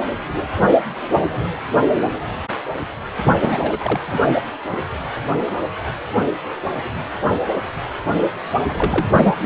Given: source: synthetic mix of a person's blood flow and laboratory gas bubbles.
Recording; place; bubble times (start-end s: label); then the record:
Doppler ultrasound of blood flow; precordium
3.25-4.00 s: bubbles
4.07-4.32 s: bubbles
8.69-9.07 s: bubbles
9.17-9.32 s: bubbles
From the record:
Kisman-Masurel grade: 222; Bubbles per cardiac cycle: several, 3 to 8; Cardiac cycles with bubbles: 10 to 50%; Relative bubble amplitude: moderate (0.250 to 0.450); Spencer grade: 2 (many but less than half of the cardiac periods contain bubble signals, singularly or in groups); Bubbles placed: anywhere in the cardiac cycle